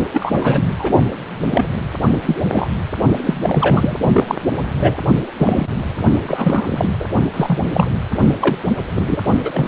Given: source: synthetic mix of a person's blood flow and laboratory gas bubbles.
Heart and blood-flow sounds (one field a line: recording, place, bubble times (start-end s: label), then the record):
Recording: Doppler ultrasound of blood flow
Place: precordium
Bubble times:
0.12-0.62 s: bubbles
0.67-0.73 s: bubbles
0.79-0.91 s: bubbles
1.50-1.65 s: bubbles
2.26-2.37 s: bubbles
2.52-2.70 s: bubbles
3.25-3.96 s: bubbles
4.12-4.35 s: bubbles
4.81-4.96 s: bubbles
5.38-5.69 s: bubbles
6.23-6.90 s: bubbles
7.00-7.05 s: bubbles
7.33-7.88 s: bubbles
8.40-8.58 s: bubbles
8.94-9.22 s: bubbles
9.44-9.68 s: bubbles
From the record:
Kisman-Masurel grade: 243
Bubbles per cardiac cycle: several, 3 to 8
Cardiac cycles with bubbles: 100%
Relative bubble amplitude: loud (0.450 to 0.775)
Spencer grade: 3 (all of the cardiac periods contain showers or single bubble signals, but not dominating or overriding the cardiac motion signals)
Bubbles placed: only in the low amplitude regions of the cardiac cycle